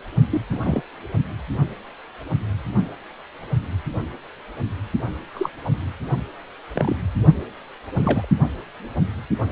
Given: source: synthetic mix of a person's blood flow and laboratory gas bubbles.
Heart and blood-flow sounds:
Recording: Doppler ultrasound of blood flow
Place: precordium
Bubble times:
0.30-0.41 s: bubbles
0.51-0.81 s: bubbles
5.33-5.50 s: bubbles
5.65-5.71 s: bubbles
6.74-6.96 s: bubbles
7.97-8.27 s: bubbles
From the record:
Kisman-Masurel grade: 122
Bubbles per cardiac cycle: 1 to 2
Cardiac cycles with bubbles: 10 to 50%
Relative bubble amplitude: moderate (0.250 to 0.450)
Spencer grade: 2 (many but less than half of the cardiac periods contain bubble signals, singularly or in groups)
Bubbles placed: only in the low amplitude regions of the cardiac cycle

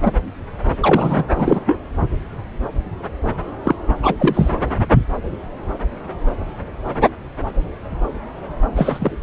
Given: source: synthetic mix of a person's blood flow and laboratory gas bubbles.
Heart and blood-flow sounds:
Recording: Doppler ultrasound of blood flow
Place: subclavian vein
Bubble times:
0.02-0.11 s: bubbles
0.81-1.24 s: bubbles
1.36-1.59 s: bubbles
1.66-1.80 s: bubbles
3.63-3.75 s: bubbles
4.02-4.54 s: bubbles
8.76-9.17 s: bubbles
From the record:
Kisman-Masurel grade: 223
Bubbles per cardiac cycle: several, 3 to 8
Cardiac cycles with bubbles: 10 to 50%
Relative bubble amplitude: loud (0.450 to 0.775)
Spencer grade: 2 (many but less than half of the cardiac periods contain bubble signals, singularly or in groups)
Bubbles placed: anywhere in the cardiac cycle

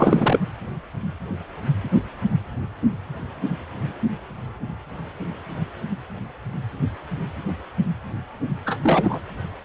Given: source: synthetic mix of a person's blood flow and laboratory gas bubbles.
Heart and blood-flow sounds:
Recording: Doppler ultrasound of blood flow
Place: precordium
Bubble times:
0.00-0.43 s: bubbles
8.65-8.77 s: bubbles
8.83-9.20 s: bubbles
From the record:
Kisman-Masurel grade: 223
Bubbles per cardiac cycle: several, 3 to 8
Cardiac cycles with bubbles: 10 to 50%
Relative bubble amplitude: loud (0.450 to 0.775)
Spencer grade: 2 (many but less than half of the cardiac periods contain bubble signals, singularly or in groups)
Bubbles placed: anywhere in the cardiac cycle

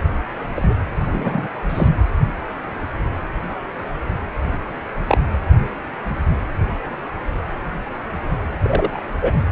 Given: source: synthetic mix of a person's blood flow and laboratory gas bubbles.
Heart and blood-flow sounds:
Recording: Doppler ultrasound of blood flow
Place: precordium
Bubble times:
0.55-0.76 s: bubbles
1.12-1.49 s: bubbles
1.69-1.88 s: bubbles
5.07-5.18 s: bubbles
8.62-9.01 s: bubbles
9.21-9.34 s: bubbles
From the record:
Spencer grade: 2 (many but less than half of the cardiac periods contain bubble signals, singularly or in groups)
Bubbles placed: anywhere in the cardiac cycle

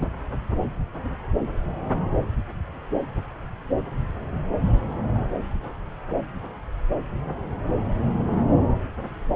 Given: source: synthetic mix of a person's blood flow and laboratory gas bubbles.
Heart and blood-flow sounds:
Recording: Doppler ultrasound of blood flow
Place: subclavian vein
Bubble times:
0.01-0.06 s: bubbles
From the record:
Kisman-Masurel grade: 123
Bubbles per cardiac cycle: 1 to 2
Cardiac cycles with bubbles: 10 to 50%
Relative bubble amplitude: loud (0.450 to 0.775)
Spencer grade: 2 (many but less than half of the cardiac periods contain bubble signals, singularly or in groups)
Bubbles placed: anywhere in the cardiac cycle

